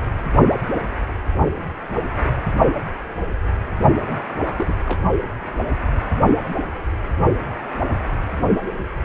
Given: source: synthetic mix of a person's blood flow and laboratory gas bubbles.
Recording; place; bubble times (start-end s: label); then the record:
Doppler ultrasound of blood flow; precordium
4.06-4.21 s: bubbles
4.27-4.76 s: bubbles
4.86-5.00 s: bubbles
From the record:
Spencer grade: 1 (occasional bubble signal discernible with the cardiac motion signal, with majority of cardiac periods free of bubbles); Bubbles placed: only in the low amplitude regions of the cardiac cycle